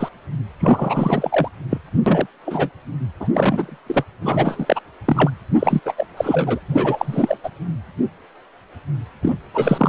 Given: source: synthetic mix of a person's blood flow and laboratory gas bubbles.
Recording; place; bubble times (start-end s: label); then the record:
Doppler ultrasound of blood flow; precordium
0.00-0.09 s: bubbles
0.60-1.48 s: bubbles
1.70-1.78 s: bubbles
2.06-2.27 s: bubbles
2.46-2.71 s: bubbles
3.20-3.28 s: bubbles
3.34-3.78 s: bubbles
3.87-4.04 s: bubbles
4.21-4.80 s: bubbles
5.05-5.31 s: bubbles
5.59-5.80 s: bubbles
5.85-5.94 s: bubbles
5.97-6.06 s: bubbles
6.17-6.59 s: bubbles
6.68-7.37 s: bubbles
7.43-7.50 s: bubbles
9.21-9.35 s: bubbles
9.53-9.89 s: bubbles
From the record:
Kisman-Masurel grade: 333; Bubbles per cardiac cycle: rolling drumbeat, 9 or more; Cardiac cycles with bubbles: 50 to 99%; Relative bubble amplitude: loud (0.450 to 0.775); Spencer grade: 3 (all of the cardiac periods contain showers or single bubble signals, but not dominating or overriding the cardiac motion signals); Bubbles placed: anywhere in the cardiac cycle